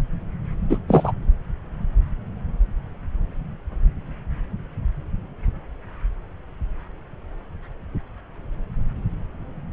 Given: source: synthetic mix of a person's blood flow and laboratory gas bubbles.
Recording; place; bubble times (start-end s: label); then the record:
Doppler ultrasound of blood flow; subclavian vein
0.70-0.78 s: bubbles
0.88-1.12 s: bubbles
From the record:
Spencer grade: 1 (occasional bubble signal discernible with the cardiac motion signal, with majority of cardiac periods free of bubbles); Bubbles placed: anywhere in the cardiac cycle